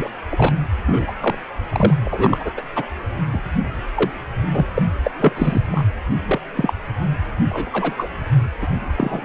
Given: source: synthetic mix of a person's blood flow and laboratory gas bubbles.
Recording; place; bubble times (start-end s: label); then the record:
Doppler ultrasound of blood flow; precordium
0.00-0.10 s: bubbles
0.31-0.57 s: bubbles
0.86-1.12 s: bubbles
1.20-1.35 s: bubbles
1.70-1.94 s: bubbles
2.04-2.50 s: bubbles
2.57-2.62 s: bubbles
2.75-2.86 s: bubbles
3.33-3.41 s: bubbles
3.95-4.11 s: bubbles
4.51-4.66 s: bubbles
4.75-4.83 s: bubbles
5.03-5.11 s: bubbles
5.19-5.32 s: bubbles
5.36-5.61 s: bubbles
5.71-5.83 s: bubbles
6.26-6.40 s: bubbles
6.56-6.73 s: bubbles
7.49-8.10 s: bubbles
8.62-8.67 s: bubbles
8.96-9.25 s: bubbles
From the record:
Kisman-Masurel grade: 242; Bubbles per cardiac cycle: several, 3 to 8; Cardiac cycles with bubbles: 100%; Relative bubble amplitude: moderate (0.250 to 0.450); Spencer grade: 3 (all of the cardiac periods contain showers or single bubble signals, but not dominating or overriding the cardiac motion signals); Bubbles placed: anywhere in the cardiac cycle